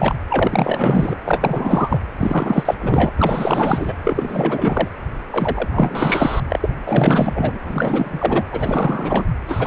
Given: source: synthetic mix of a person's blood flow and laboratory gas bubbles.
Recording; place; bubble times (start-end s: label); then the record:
Doppler ultrasound of blood flow; precordium
0.00-0.15 s: bubbles
0.29-1.17 s: bubbles
1.25-1.99 s: bubbles
2.17-2.75 s: bubbles
2.80-3.10 s: bubbles
3.18-3.94 s: bubbles
4.04-4.88 s: bubbles
5.31-5.69 s: bubbles
5.71-6.40 s: bubbles
6.48-6.70 s: bubbles
6.87-7.58 s: bubbles
7.63-8.45 s: bubbles
8.51-9.25 s: bubbles
9.47-9.67 s: bubbles
From the record:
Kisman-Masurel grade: 444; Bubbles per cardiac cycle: continuous sound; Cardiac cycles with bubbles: 100%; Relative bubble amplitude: maximal (0.775 to 0.999); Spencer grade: 4 (maximum detectable bubble signal sounding continuously throughout systole and diastole of every cardiac period, and overriding the amplitude of the normal cardiac signals); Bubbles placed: anywhere in the cardiac cycle